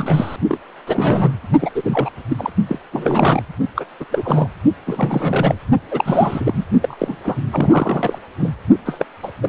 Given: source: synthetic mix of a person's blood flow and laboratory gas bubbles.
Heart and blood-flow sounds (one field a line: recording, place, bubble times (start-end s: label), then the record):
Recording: Doppler ultrasound of blood flow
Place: precordium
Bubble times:
0.00-0.36 s: bubbles
0.48-0.60 s: bubbles
0.87-1.33 s: bubbles
1.60-1.70 s: bubbles
1.75-2.10 s: bubbles
2.29-2.50 s: bubbles
2.68-2.79 s: bubbles
2.93-3.42 s: bubbles
3.76-3.85 s: bubbles
4.00-4.05 s: bubbles
4.11-4.47 s: bubbles
4.86-5.55 s: bubbles
5.91-6.65 s: bubbles
6.81-7.17 s: bubbles
7.24-7.36 s: bubbles
7.51-8.19 s: bubbles
8.40-8.50 s: bubbles
8.85-9.05 s: bubbles
9.23-9.31 s: bubbles
9.42-9.49 s: bubbles
From the record:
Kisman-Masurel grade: 342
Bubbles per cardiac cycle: rolling drumbeat, 9 or more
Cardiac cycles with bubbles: 100%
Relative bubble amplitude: moderate (0.250 to 0.450)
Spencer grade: 3 (all of the cardiac periods contain showers or single bubble signals, but not dominating or overriding the cardiac motion signals)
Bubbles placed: only in the low amplitude regions of the cardiac cycle